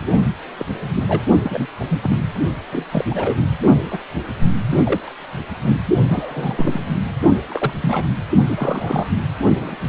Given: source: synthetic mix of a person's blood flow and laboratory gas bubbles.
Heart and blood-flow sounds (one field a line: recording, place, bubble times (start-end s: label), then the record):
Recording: Doppler ultrasound of blood flow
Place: precordium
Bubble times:
0.00-0.07 s: bubbles
0.58-0.65 s: bubbles
0.89-1.22 s: bubbles
1.43-1.68 s: bubbles
1.77-2.16 s: bubbles
2.72-2.84 s: bubbles
2.91-3.04 s: bubbles
3.09-3.35 s: bubbles
3.91-3.99 s: bubbles
4.70-5.14 s: bubbles
5.63-5.75 s: bubbles
6.07-6.81 s: bubbles
7.50-7.73 s: bubbles
7.80-8.08 s: bubbles
8.47-9.07 s: bubbles
9.60-9.76 s: bubbles
From the record:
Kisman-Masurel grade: 242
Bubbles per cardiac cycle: several, 3 to 8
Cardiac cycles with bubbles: 100%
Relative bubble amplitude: moderate (0.250 to 0.450)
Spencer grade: 3 (all of the cardiac periods contain showers or single bubble signals, but not dominating or overriding the cardiac motion signals)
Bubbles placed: only in the low amplitude regions of the cardiac cycle